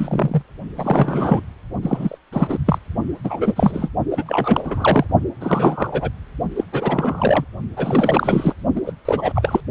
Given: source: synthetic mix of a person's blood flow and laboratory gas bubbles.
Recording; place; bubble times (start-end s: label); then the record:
Doppler ultrasound of blood flow; precordium
0.00-0.43 s: bubbles
0.77-1.43 s: bubbles
1.82-2.18 s: bubbles
2.33-2.58 s: bubbles
2.66-2.79 s: bubbles
3.24-3.38 s: bubbles
3.41-3.90 s: bubbles
4.10-5.05 s: bubbles
5.40-6.10 s: bubbles
6.56-6.64 s: bubbles
6.72-7.45 s: bubbles
7.76-8.53 s: bubbles
8.75-8.81 s: bubbles
8.86-8.93 s: bubbles
9.05-9.33 s: bubbles
9.35-9.61 s: bubbles
From the record:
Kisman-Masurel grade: 343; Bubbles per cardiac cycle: rolling drumbeat, 9 or more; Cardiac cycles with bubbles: 100%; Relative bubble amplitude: loud (0.450 to 0.775); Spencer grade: 3 (all of the cardiac periods contain showers or single bubble signals, but not dominating or overriding the cardiac motion signals); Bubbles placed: only in the low amplitude regions of the cardiac cycle